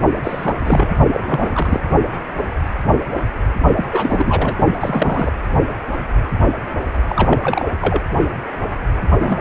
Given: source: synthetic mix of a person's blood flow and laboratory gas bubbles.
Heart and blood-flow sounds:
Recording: Doppler ultrasound of blood flow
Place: precordium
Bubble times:
0.23-0.56 s: bubbles
0.65-0.97 s: bubbles
1.12-1.21 s: bubbles
1.23-1.80 s: bubbles
3.76-3.86 s: bubbles
3.92-4.58 s: bubbles
4.78-5.32 s: bubbles
7.08-7.41 s: bubbles
7.44-7.72 s: bubbles
7.81-8.01 s: bubbles
9.20-9.41 s: bubbles
From the record:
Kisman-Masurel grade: 332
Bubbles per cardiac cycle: rolling drumbeat, 9 or more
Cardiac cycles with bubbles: 50 to 99%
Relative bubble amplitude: moderate (0.250 to 0.450)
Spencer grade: 3 (all of the cardiac periods contain showers or single bubble signals, but not dominating or overriding the cardiac motion signals)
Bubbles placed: only in the low amplitude regions of the cardiac cycle

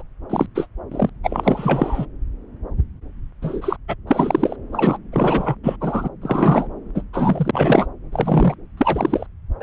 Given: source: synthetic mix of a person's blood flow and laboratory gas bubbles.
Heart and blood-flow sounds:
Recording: Doppler ultrasound of blood flow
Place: subclavian vein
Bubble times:
0.00-0.03 s: bubbles
0.30-0.46 s: bubbles
0.55-0.67 s: bubbles
0.92-1.09 s: bubbles
1.23-2.06 s: bubbles
3.42-3.76 s: bubbles
3.88-3.95 s: bubbles
4.07-4.56 s: bubbles
4.72-4.98 s: bubbles
5.12-5.55 s: bubbles
5.63-5.76 s: bubbles
5.80-6.09 s: bubbles
6.21-6.67 s: bubbles
6.94-7.02 s: bubbles
7.13-7.87 s: bubbles
8.12-8.55 s: bubbles
8.77-9.27 s: bubbles
9.60-9.63 s: bubbles
From the record:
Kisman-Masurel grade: 233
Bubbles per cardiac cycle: several, 3 to 8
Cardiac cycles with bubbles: 50 to 99%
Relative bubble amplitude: loud (0.450 to 0.775)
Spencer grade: 3 (all of the cardiac periods contain showers or single bubble signals, but not dominating or overriding the cardiac motion signals)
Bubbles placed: anywhere in the cardiac cycle

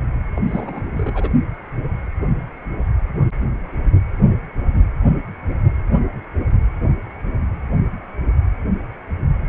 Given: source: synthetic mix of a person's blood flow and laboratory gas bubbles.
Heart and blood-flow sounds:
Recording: Doppler ultrasound of blood flow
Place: precordium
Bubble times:
0.35-0.41 s: bubbles
0.46-0.88 s: bubbles
0.94-1.29 s: bubbles
From the record:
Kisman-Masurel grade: 211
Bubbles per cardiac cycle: several, 3 to 8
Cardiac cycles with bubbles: 1 to 10%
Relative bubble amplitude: barely perceptible (0.100 to 0.250)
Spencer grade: 1 (occasional bubble signal discernible with the cardiac motion signal, with majority of cardiac periods free of bubbles)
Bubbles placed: only in the low amplitude regions of the cardiac cycle

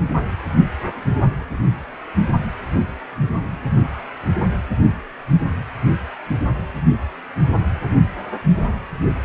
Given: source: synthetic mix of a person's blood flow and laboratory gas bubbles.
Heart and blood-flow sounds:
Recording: Doppler ultrasound of blood flow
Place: precordium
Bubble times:
no bubbles
From the record:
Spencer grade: 0 (complete lack of bubble signals)

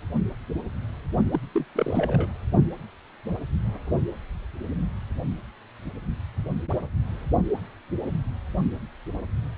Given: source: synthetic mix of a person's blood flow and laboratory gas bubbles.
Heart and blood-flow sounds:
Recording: Doppler ultrasound of blood flow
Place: precordium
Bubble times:
1.32-1.40 s: bubbles
1.55-1.65 s: bubbles
1.75-2.29 s: bubbles
From the record:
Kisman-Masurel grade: 221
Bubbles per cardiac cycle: several, 3 to 8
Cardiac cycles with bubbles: 10 to 50%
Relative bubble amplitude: barely perceptible (0.100 to 0.250)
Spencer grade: 2 (many but less than half of the cardiac periods contain bubble signals, singularly or in groups)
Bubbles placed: only in the low amplitude regions of the cardiac cycle

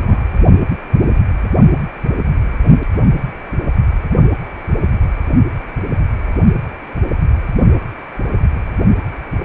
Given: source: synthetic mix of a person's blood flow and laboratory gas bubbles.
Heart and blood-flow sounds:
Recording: Doppler ultrasound of blood flow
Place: precordium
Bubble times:
0.00-0.24 s: bubbles
From the record:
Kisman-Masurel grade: 222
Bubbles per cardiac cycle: several, 3 to 8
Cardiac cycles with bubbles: 10 to 50%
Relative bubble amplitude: moderate (0.250 to 0.450)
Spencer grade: 2 (many but less than half of the cardiac periods contain bubble signals, singularly or in groups)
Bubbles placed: only in the low amplitude regions of the cardiac cycle

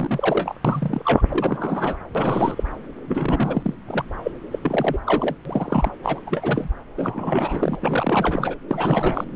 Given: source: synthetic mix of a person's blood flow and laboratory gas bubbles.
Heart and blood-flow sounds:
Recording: Doppler ultrasound of blood flow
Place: subclavian vein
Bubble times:
0.00-0.55 s: bubbles
0.65-1.02 s: bubbles
1.05-1.22 s: bubbles
1.29-1.98 s: bubbles
2.15-2.63 s: bubbles
3.07-3.74 s: bubbles
3.88-4.04 s: bubbles
4.23-4.31 s: bubbles
4.52-4.59 s: bubbles
4.63-4.98 s: bubbles
5.06-5.35 s: bubbles
5.45-5.91 s: bubbles
6.03-6.20 s: bubbles
6.26-6.68 s: bubbles
6.97-7.76 s: bubbles
7.80-8.55 s: bubbles
8.69-9.36 s: bubbles
From the record:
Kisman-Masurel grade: 332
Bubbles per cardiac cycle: rolling drumbeat, 9 or more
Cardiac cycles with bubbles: 50 to 99%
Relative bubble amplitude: moderate (0.250 to 0.450)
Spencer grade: 3 (all of the cardiac periods contain showers or single bubble signals, but not dominating or overriding the cardiac motion signals)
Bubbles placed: anywhere in the cardiac cycle

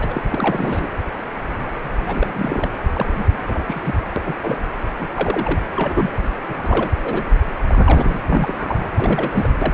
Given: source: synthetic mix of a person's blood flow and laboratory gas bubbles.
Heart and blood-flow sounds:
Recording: Doppler ultrasound of blood flow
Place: precordium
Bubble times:
0.00-0.25 s: bubbles
0.30-0.88 s: bubbles
2.06-2.69 s: bubbles
2.93-3.06 s: bubbles
3.16-3.25 s: bubbles
3.47-3.65 s: bubbles
3.67-3.81 s: bubbles
3.85-3.94 s: bubbles
4.16-4.22 s: bubbles
4.25-4.34 s: bubbles
4.42-4.57 s: bubbles
4.98-5.08 s: bubbles
5.15-5.60 s: bubbles
5.75-6.10 s: bubbles
6.50-6.89 s: bubbles
6.95-6.99 s: bubbles
7.03-7.24 s: bubbles
7.67-8.18 s: bubbles
8.27-8.90 s: bubbles
8.93-9.52 s: bubbles
9.61-9.74 s: bubbles
From the record:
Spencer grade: 3 (all of the cardiac periods contain showers or single bubble signals, but not dominating or overriding the cardiac motion signals)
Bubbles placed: anywhere in the cardiac cycle

